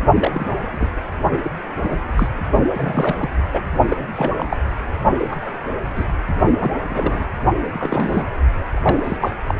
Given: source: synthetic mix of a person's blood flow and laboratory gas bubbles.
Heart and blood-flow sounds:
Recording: Doppler ultrasound of blood flow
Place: precordium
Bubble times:
0.15-0.94 s: bubbles
1.43-1.49 s: bubbles
1.83-1.96 s: bubbles
2.16-2.28 s: bubbles
2.73-3.29 s: bubbles
3.53-3.67 s: bubbles
3.90-3.96 s: bubbles
4.16-4.31 s: bubbles
4.37-4.46 s: bubbles
4.50-4.57 s: bubbles
5.17-5.37 s: bubbles
5.42-5.51 s: bubbles
5.95-6.04 s: bubbles
6.59-6.71 s: bubbles
6.90-7.26 s: bubbles
7.73-8.23 s: bubbles
8.71-9.18 s: bubbles
9.20-9.31 s: bubbles
9.48-9.54 s: bubbles
From the record:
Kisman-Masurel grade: 242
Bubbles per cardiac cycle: several, 3 to 8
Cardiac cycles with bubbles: 100%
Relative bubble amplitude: moderate (0.250 to 0.450)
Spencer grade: 3 (all of the cardiac periods contain showers or single bubble signals, but not dominating or overriding the cardiac motion signals)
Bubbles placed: only in the low amplitude regions of the cardiac cycle

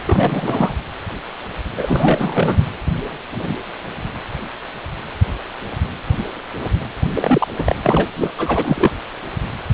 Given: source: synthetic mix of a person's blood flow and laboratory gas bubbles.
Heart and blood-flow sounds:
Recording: Doppler ultrasound of blood flow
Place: precordium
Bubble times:
0.05-0.73 s: bubbles
1.77-2.62 s: bubbles
7.14-7.48 s: bubbles
7.58-7.75 s: bubbles
7.83-8.09 s: bubbles
8.13-8.32 s: bubbles
8.38-8.94 s: bubbles
From the record:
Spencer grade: 3 (all of the cardiac periods contain showers or single bubble signals, but not dominating or overriding the cardiac motion signals)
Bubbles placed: anywhere in the cardiac cycle

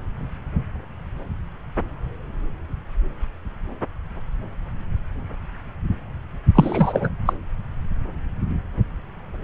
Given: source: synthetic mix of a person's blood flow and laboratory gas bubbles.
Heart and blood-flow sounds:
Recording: Doppler ultrasound of blood flow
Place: subclavian vein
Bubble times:
6.54-7.09 s: bubbles
7.25-7.33 s: bubbles
From the record:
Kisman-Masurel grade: 213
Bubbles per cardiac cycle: several, 3 to 8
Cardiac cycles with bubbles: 1 to 10%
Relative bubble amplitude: loud (0.450 to 0.775)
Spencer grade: 1 (occasional bubble signal discernible with the cardiac motion signal, with majority of cardiac periods free of bubbles)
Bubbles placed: anywhere in the cardiac cycle

